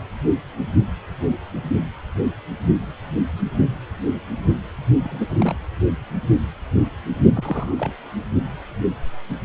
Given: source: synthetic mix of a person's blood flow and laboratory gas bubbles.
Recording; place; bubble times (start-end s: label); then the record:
Doppler ultrasound of blood flow; precordium
5.04-5.25 s: bubbles
5.29-5.53 s: bubbles
7.35-7.74 s: bubbles
7.77-7.93 s: bubbles
From the record:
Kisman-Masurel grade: 221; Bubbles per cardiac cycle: several, 3 to 8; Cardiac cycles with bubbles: 10 to 50%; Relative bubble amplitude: barely perceptible (0.100 to 0.250); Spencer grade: 2 (many but less than half of the cardiac periods contain bubble signals, singularly or in groups); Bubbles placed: only in the low amplitude regions of the cardiac cycle